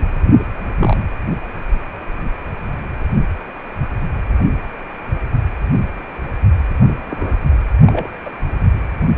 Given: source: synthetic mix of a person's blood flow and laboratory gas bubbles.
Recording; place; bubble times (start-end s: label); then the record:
Doppler ultrasound of blood flow; precordium
0.79-0.96 s: bubbles
7.06-7.39 s: bubbles
7.87-8.08 s: bubbles
8.25-8.30 s: bubbles
From the record:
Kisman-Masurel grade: 122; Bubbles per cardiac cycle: 1 to 2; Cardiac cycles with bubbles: 10 to 50%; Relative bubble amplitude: moderate (0.250 to 0.450); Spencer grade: 2 (many but less than half of the cardiac periods contain bubble signals, singularly or in groups); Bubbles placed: anywhere in the cardiac cycle